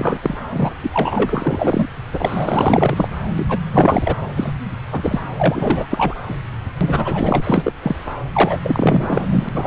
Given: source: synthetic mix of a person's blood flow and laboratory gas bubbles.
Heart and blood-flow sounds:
Doppler ultrasound of blood flow; subclavian vein
0.00-0.19 s: bubbles
0.22-0.38 s: bubbles
0.49-0.71 s: bubbles
0.82-1.87 s: bubbles
2.13-3.10 s: bubbles
3.36-3.46 s: bubbles
3.49-3.60 s: bubbles
3.73-4.17 s: bubbles
4.36-4.52 s: bubbles
4.92-5.20 s: bubbles
5.36-5.86 s: bubbles
5.90-6.15 s: bubbles
6.28-6.34 s: bubbles
6.80-7.72 s: bubbles
7.82-7.96 s: bubbles
8.32-8.59 s: bubbles
8.63-9.49 s: bubbles
9.54-9.67 s: bubbles
From the record:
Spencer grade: 4 (maximum detectable bubble signal sounding continuously throughout systole and diastole of every cardiac period, and overriding the amplitude of the normal cardiac signals); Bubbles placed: anywhere in the cardiac cycle

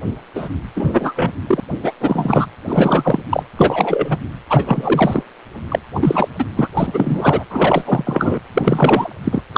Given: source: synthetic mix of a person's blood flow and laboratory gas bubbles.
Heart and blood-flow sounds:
Doppler ultrasound of blood flow; precordium
0.35-0.48 s: bubbles
0.74-1.31 s: bubbles
1.47-1.60 s: bubbles
1.82-1.92 s: bubbles
2.00-2.48 s: bubbles
2.67-3.23 s: bubbles
3.29-3.43 s: bubbles
3.56-4.18 s: bubbles
4.50-5.23 s: bubbles
5.68-5.79 s: bubbles
5.95-6.28 s: bubbles
6.38-6.45 s: bubbles
6.56-6.68 s: bubbles
6.77-7.43 s: bubbles
7.50-8.39 s: bubbles
8.54-9.15 s: bubbles
9.23-9.42 s: bubbles
9.53-9.58 s: bubbles
From the record:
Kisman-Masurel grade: 343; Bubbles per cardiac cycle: rolling drumbeat, 9 or more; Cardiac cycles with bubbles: 100%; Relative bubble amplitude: loud (0.450 to 0.775); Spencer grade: 3 (all of the cardiac periods contain showers or single bubble signals, but not dominating or overriding the cardiac motion signals); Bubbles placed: anywhere in the cardiac cycle

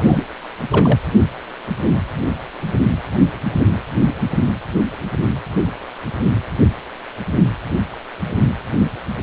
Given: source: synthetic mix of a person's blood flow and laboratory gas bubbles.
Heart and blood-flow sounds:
Doppler ultrasound of blood flow; precordium
0.00-0.24 s: bubbles
0.70-0.99 s: bubbles
From the record:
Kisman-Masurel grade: 212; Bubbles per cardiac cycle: several, 3 to 8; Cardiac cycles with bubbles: 1 to 10%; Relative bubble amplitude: moderate (0.250 to 0.450); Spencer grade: 1 (occasional bubble signal discernible with the cardiac motion signal, with majority of cardiac periods free of bubbles); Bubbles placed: only in the low amplitude regions of the cardiac cycle

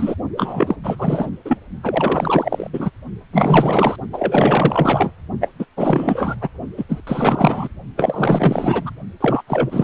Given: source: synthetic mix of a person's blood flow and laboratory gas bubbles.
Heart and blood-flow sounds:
Doppler ultrasound of blood flow; precordium
0.00-0.15 s: bubbles
0.36-0.76 s: bubbles
0.83-0.95 s: bubbles
0.98-1.30 s: bubbles
1.45-1.58 s: bubbles
1.83-2.69 s: bubbles
2.73-2.90 s: bubbles
3.32-3.96 s: bubbles
4.12-5.12 s: bubbles
5.41-5.49 s: bubbles
5.59-5.66 s: bubbles
5.77-6.36 s: bubbles
6.41-6.49 s: bubbles
6.77-6.85 s: bubbles
6.89-7.01 s: bubbles
7.07-7.68 s: bubbles
7.97-8.90 s: bubbles
9.21-9.42 s: bubbles
9.47-9.84 s: bubbles
From the record:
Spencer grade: 4 (maximum detectable bubble signal sounding continuously throughout systole and diastole of every cardiac period, and overriding the amplitude of the normal cardiac signals); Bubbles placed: only in the low amplitude regions of the cardiac cycle

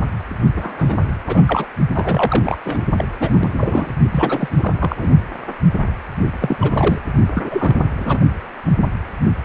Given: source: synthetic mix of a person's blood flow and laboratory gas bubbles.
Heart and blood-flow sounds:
Doppler ultrasound of blood flow; precordium
0.55-1.02 s: bubbles
1.27-1.43 s: bubbles
1.46-1.67 s: bubbles
1.94-2.58 s: bubbles
2.65-2.85 s: bubbles
2.96-3.04 s: bubbles
3.19-3.54 s: bubbles
3.58-3.90 s: bubbles
4.10-4.48 s: bubbles
4.57-4.73 s: bubbles
4.80-4.96 s: bubbles
4.99-5.08 s: bubbles
6.41-6.99 s: bubbles
7.34-7.76 s: bubbles
7.96-8.19 s: bubbles
From the record:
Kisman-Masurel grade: 332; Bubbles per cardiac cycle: rolling drumbeat, 9 or more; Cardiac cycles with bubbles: 50 to 99%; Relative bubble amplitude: moderate (0.250 to 0.450); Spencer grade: 3 (all of the cardiac periods contain showers or single bubble signals, but not dominating or overriding the cardiac motion signals); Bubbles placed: only in the low amplitude regions of the cardiac cycle

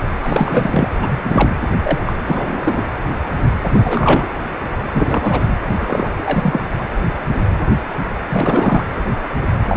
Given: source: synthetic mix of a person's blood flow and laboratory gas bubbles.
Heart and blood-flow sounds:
Doppler ultrasound of blood flow; precordium
0.22-0.89 s: bubbles
1.01-1.56 s: bubbles
1.84-1.99 s: bubbles
2.05-2.13 s: bubbles
2.26-2.86 s: bubbles
3.73-4.28 s: bubbles
4.93-5.46 s: bubbles
5.79-6.13 s: bubbles
6.18-6.23 s: bubbles
6.25-6.61 s: bubbles
8.29-8.85 s: bubbles
9.68-9.77 s: bubbles
From the record:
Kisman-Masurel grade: 333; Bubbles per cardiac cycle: rolling drumbeat, 9 or more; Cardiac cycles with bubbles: 50 to 99%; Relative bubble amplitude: loud (0.450 to 0.775); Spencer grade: 3 (all of the cardiac periods contain showers or single bubble signals, but not dominating or overriding the cardiac motion signals); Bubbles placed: anywhere in the cardiac cycle

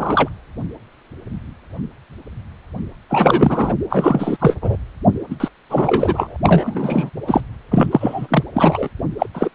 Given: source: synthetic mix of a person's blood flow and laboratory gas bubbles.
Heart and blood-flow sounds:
Doppler ultrasound of blood flow; precordium
0.00-0.29 s: bubbles
3.09-3.73 s: bubbles
3.90-4.37 s: bubbles
4.40-4.56 s: bubbles
4.62-4.77 s: bubbles
5.30-5.35 s: bubbles
5.40-5.49 s: bubbles
5.70-6.37 s: bubbles
6.43-7.10 s: bubbles
7.27-7.41 s: bubbles
7.71-8.44 s: bubbles
8.54-8.89 s: bubbles
9.19-9.27 s: bubbles
9.34-9.51 s: bubbles
From the record:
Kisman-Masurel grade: 333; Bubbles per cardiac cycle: rolling drumbeat, 9 or more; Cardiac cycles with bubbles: 50 to 99%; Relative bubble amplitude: loud (0.450 to 0.775); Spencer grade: 3 (all of the cardiac periods contain showers or single bubble signals, but not dominating or overriding the cardiac motion signals); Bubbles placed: anywhere in the cardiac cycle

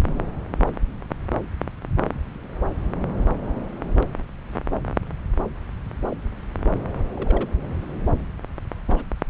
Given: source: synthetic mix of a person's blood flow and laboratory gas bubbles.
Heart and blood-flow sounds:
Doppler ultrasound of blood flow; subclavian vein
6.10-6.16 s: bubbles
7.13-7.49 s: bubbles
7.62-7.67 s: bubbles
8.88-9.03 s: bubbles
9.28-9.30 s: bubbles
From the record:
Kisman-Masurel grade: 121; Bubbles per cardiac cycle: 1 to 2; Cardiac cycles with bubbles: 10 to 50%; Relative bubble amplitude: barely perceptible (0.100 to 0.250); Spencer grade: 2 (many but less than half of the cardiac periods contain bubble signals, singularly or in groups); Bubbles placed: anywhere in the cardiac cycle

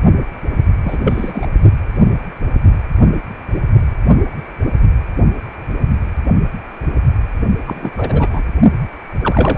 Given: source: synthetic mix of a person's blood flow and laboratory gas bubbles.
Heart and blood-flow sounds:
Doppler ultrasound of blood flow; precordium
0.69-1.00 s: bubbles
1.04-1.47 s: bubbles
7.67-7.91 s: bubbles
7.97-8.27 s: bubbles
8.30-8.43 s: bubbles
9.21-9.58 s: bubbles
From the record:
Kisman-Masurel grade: 223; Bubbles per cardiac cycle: several, 3 to 8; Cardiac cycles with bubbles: 10 to 50%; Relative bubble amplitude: loud (0.450 to 0.775); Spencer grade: 2 (many but less than half of the cardiac periods contain bubble signals, singularly or in groups); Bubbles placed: only in the low amplitude regions of the cardiac cycle

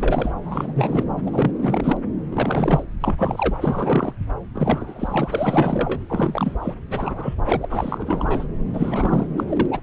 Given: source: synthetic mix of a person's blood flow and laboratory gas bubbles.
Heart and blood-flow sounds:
Doppler ultrasound of blood flow; subclavian vein
0.00-0.32 s: bubbles
0.43-1.03 s: bubbles
1.26-1.51 s: bubbles
1.59-1.97 s: bubbles
2.31-2.83 s: bubbles
3.00-3.58 s: bubbles
3.61-4.13 s: bubbles
4.54-6.01 s: bubbles
6.08-6.55 s: bubbles
6.61-6.75 s: bubbles
6.90-7.35 s: bubbles
7.44-8.46 s: bubbles
8.73-9.44 s: bubbles
9.47-9.66 s: bubbles
9.71-9.80 s: bubbles
From the record:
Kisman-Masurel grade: 342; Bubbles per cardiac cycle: rolling drumbeat, 9 or more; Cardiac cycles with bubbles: 100%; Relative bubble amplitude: moderate (0.250 to 0.450); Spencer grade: 3 (all of the cardiac periods contain showers or single bubble signals, but not dominating or overriding the cardiac motion signals); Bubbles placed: anywhere in the cardiac cycle

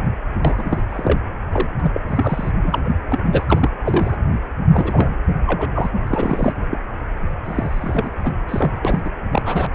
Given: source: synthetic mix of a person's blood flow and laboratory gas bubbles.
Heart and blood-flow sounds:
Doppler ultrasound of blood flow; precordium
0.44-0.82 s: bubbles
0.89-1.19 s: bubbles
1.52-1.69 s: bubbles
1.79-1.91 s: bubbles
1.94-2.00 s: bubbles
2.08-2.52 s: bubbles
2.62-2.95 s: bubbles
3.10-3.20 s: bubbles
3.23-3.70 s: bubbles
3.83-4.17 s: bubbles
4.73-5.18 s: bubbles
5.46-5.90 s: bubbles
6.07-6.53 s: bubbles
6.70-6.79 s: bubbles
7.45-8.10 s: bubbles
8.23-8.31 s: bubbles
8.48-8.79 s: bubbles
8.84-8.99 s: bubbles
9.04-9.10 s: bubbles
9.31-9.42 s: bubbles
9.45-9.66 s: bubbles
9.73-9.75 s: bubbles
From the record:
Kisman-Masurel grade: 342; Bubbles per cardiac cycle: rolling drumbeat, 9 or more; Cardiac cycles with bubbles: 100%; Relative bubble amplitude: moderate (0.250 to 0.450); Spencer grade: 3 (all of the cardiac periods contain showers or single bubble signals, but not dominating or overriding the cardiac motion signals); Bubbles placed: anywhere in the cardiac cycle

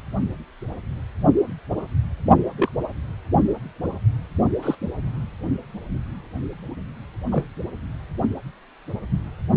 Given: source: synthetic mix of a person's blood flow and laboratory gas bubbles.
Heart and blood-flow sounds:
Doppler ultrasound of blood flow; precordium
2.57-2.69 s: bubbles
4.62-4.75 s: bubbles
7.30-7.48 s: bubbles
From the record:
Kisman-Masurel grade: 122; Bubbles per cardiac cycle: 1 to 2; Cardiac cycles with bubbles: 10 to 50%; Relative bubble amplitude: moderate (0.250 to 0.450); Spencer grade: 2 (many but less than half of the cardiac periods contain bubble signals, singularly or in groups); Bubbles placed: only in the low amplitude regions of the cardiac cycle

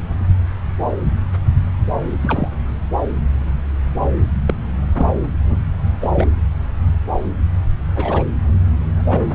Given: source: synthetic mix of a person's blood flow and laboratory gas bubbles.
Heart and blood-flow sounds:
Doppler ultrasound of blood flow; subclavian vein
2.21-2.48 s: bubbles
4.45-4.54 s: bubbles
4.95-5.10 s: bubbles
5.47-5.57 s: bubbles
6.01-6.12 s: bubbles
6.15-6.26 s: bubbles
7.96-8.24 s: bubbles
9.09-9.21 s: bubbles
From the record:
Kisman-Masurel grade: 122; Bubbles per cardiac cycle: 1 to 2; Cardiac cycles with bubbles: 10 to 50%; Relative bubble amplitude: moderate (0.250 to 0.450); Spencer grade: 2 (many but less than half of the cardiac periods contain bubble signals, singularly or in groups); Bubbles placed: anywhere in the cardiac cycle

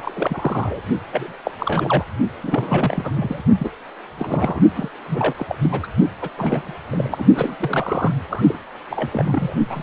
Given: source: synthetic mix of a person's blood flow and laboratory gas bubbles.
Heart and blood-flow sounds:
Doppler ultrasound of blood flow; precordium
0.00-0.79 s: bubbles
1.11-1.32 s: bubbles
1.44-1.51 s: bubbles
1.58-2.04 s: bubbles
2.43-3.43 s: bubbles
3.58-3.71 s: bubbles
4.18-4.60 s: bubbles
4.75-4.89 s: bubbles
5.06-5.34 s: bubbles
5.38-5.46 s: bubbles
5.48-5.56 s: bubbles
5.61-5.87 s: bubbles
6.21-6.30 s: bubbles
6.37-6.73 s: bubbles
6.92-7.26 s: bubbles
7.35-8.14 s: bubbles
8.29-8.60 s: bubbles
8.90-9.54 s: bubbles
9.70-9.83 s: bubbles
From the record:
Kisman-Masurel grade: 342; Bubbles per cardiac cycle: rolling drumbeat, 9 or more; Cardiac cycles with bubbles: 100%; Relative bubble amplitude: moderate (0.250 to 0.450); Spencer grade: 3 (all of the cardiac periods contain showers or single bubble signals, but not dominating or overriding the cardiac motion signals); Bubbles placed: only in the low amplitude regions of the cardiac cycle

